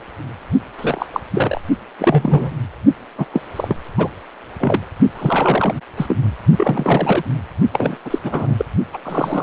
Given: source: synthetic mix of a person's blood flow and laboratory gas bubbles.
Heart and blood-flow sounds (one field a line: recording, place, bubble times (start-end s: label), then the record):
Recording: Doppler ultrasound of blood flow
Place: precordium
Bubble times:
0.77-1.07 s: bubbles
1.13-1.21 s: bubbles
1.31-1.61 s: bubbles
1.99-2.52 s: bubbles
3.18-3.25 s: bubbles
3.33-3.42 s: bubbles
3.56-3.76 s: bubbles
3.97-4.09 s: bubbles
4.59-4.83 s: bubbles
5.15-5.75 s: bubbles
5.96-6.17 s: bubbles
6.57-7.22 s: bubbles
7.72-7.96 s: bubbles
8.04-8.19 s: bubbles
8.23-8.65 s: bubbles
8.93-8.97 s: bubbles
9.04-9.43 s: bubbles
From the record:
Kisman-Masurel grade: 242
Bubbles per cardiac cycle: several, 3 to 8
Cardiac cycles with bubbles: 100%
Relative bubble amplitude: moderate (0.250 to 0.450)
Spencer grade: 3 (all of the cardiac periods contain showers or single bubble signals, but not dominating or overriding the cardiac motion signals)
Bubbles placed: only in the low amplitude regions of the cardiac cycle